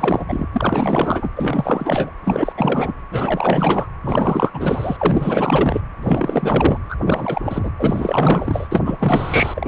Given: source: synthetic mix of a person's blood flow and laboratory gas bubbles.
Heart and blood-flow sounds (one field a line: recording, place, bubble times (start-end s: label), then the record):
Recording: Doppler ultrasound of blood flow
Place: precordium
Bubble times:
0.00-0.26 s: bubbles
0.28-0.48 s: bubbles
0.53-1.29 s: bubbles
1.36-2.10 s: bubbles
2.24-2.52 s: bubbles
2.57-2.93 s: bubbles
3.11-3.87 s: bubbles
4.04-5.80 s: bubbles
6.02-6.79 s: bubbles
6.88-6.96 s: bubbles
7.01-7.71 s: bubbles
7.78-8.67 s: bubbles
8.71-9.68 s: bubbles
From the record:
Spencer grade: 4 (maximum detectable bubble signal sounding continuously throughout systole and diastole of every cardiac period, and overriding the amplitude of the normal cardiac signals)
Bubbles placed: anywhere in the cardiac cycle